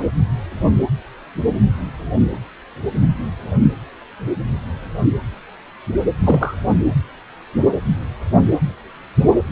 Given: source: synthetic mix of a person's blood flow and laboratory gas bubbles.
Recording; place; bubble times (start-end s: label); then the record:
Doppler ultrasound of blood flow; precordium
6.22-6.55 s: bubbles
From the record:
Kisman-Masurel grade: 113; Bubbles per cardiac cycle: 1 to 2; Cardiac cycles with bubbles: 1 to 10%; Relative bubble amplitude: loud (0.450 to 0.775); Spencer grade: 1 (occasional bubble signal discernible with the cardiac motion signal, with majority of cardiac periods free of bubbles); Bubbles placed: anywhere in the cardiac cycle